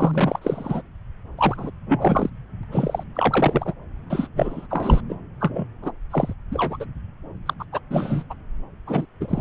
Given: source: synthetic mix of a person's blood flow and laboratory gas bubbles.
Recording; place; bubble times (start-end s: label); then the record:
Doppler ultrasound of blood flow; subclavian vein
0.00-0.82 s: bubbles
1.37-1.70 s: bubbles
1.87-2.30 s: bubbles
2.63-2.65 s: bubbles
2.71-3.03 s: bubbles
3.15-3.73 s: bubbles
4.10-4.28 s: bubbles
4.36-4.67 s: bubbles
4.70-5.01 s: bubbles
5.09-5.15 s: bubbles
5.40-5.66 s: bubbles
5.82-5.92 s: bubbles
6.10-6.33 s: bubbles
6.52-6.78 s: bubbles
6.80-6.86 s: bubbles
7.46-7.54 s: bubbles
7.59-7.64 s: bubbles
7.72-7.79 s: bubbles
7.91-8.23 s: bubbles
8.29-8.34 s: bubbles
8.87-9.05 s: bubbles
9.21-9.41 s: bubbles
From the record:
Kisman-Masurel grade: 242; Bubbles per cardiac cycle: several, 3 to 8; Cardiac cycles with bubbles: 100%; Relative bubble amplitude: moderate (0.250 to 0.450); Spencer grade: 3 (all of the cardiac periods contain showers or single bubble signals, but not dominating or overriding the cardiac motion signals); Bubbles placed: anywhere in the cardiac cycle